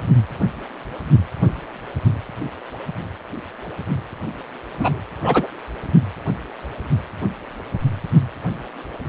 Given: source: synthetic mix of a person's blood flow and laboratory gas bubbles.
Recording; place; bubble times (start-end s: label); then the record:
Doppler ultrasound of blood flow; precordium
4.79-5.00 s: bubbles
5.22-5.47 s: bubbles
From the record:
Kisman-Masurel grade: 123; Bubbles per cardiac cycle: 1 to 2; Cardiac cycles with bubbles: 10 to 50%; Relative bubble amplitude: loud (0.450 to 0.775); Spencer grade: 2 (many but less than half of the cardiac periods contain bubble signals, singularly or in groups); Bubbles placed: anywhere in the cardiac cycle